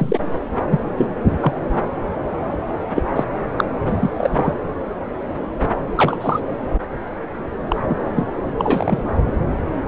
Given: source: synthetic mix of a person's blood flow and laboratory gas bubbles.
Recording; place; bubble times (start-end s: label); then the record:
Doppler ultrasound of blood flow; subclavian vein
0.00-0.20 s: bubbles
0.70-0.79 s: bubbles
0.96-1.07 s: bubbles
1.40-1.53 s: bubbles
2.94-3.02 s: bubbles
3.15-3.24 s: bubbles
3.57-3.64 s: bubbles
3.88-4.10 s: bubbles
4.17-4.51 s: bubbles
5.96-6.17 s: bubbles
6.21-6.40 s: bubbles
7.68-7.76 s: bubbles
7.88-8.09 s: bubbles
8.15-8.26 s: bubbles
8.58-9.03 s: bubbles
From the record:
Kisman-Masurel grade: 233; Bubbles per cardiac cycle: several, 3 to 8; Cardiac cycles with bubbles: 50 to 99%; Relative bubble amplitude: loud (0.450 to 0.775); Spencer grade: 3 (all of the cardiac periods contain showers or single bubble signals, but not dominating or overriding the cardiac motion signals); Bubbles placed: anywhere in the cardiac cycle